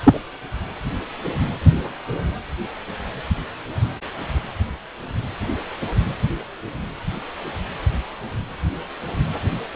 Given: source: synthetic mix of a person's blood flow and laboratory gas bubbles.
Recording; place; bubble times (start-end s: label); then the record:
Doppler ultrasound of blood flow; precordium
0.04-0.20 s: bubbles
From the record:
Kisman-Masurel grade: 113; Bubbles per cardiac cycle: 1 to 2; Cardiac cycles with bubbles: 1 to 10%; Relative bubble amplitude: loud (0.450 to 0.775); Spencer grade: 1 (occasional bubble signal discernible with the cardiac motion signal, with majority of cardiac periods free of bubbles); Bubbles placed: anywhere in the cardiac cycle